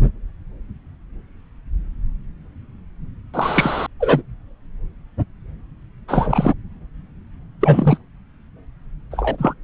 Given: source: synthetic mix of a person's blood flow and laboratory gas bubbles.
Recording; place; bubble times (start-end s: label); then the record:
Doppler ultrasound of blood flow; subclavian vein
3.33-3.87 s: bubbles
4.00-4.22 s: bubbles
6.08-6.54 s: bubbles
7.61-7.98 s: bubbles
9.11-9.54 s: bubbles
From the record:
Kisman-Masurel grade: 223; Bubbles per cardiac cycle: several, 3 to 8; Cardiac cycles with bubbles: 10 to 50%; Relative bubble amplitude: loud (0.450 to 0.775); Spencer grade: 2 (many but less than half of the cardiac periods contain bubble signals, singularly or in groups); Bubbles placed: anywhere in the cardiac cycle